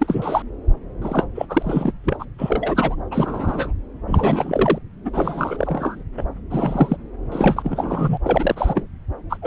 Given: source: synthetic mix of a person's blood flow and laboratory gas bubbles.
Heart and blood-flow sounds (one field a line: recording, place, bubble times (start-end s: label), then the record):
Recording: Doppler ultrasound of blood flow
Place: subclavian vein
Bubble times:
0.00-0.43 s: bubbles
1.01-1.27 s: bubbles
1.35-1.46 s: bubbles
1.49-1.92 s: bubbles
2.04-2.25 s: bubbles
2.38-2.96 s: bubbles
3.11-3.73 s: bubbles
4.07-4.79 s: bubbles
5.05-5.11 s: bubbles
5.13-6.04 s: bubbles
6.17-6.25 s: bubbles
6.50-6.97 s: bubbles
7.32-8.18 s: bubbles
8.23-8.86 s: bubbles
9.29-9.38 s: bubbles
9.42-9.47 s: bubbles
From the record:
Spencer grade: 3 (all of the cardiac periods contain showers or single bubble signals, but not dominating or overriding the cardiac motion signals)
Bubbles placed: anywhere in the cardiac cycle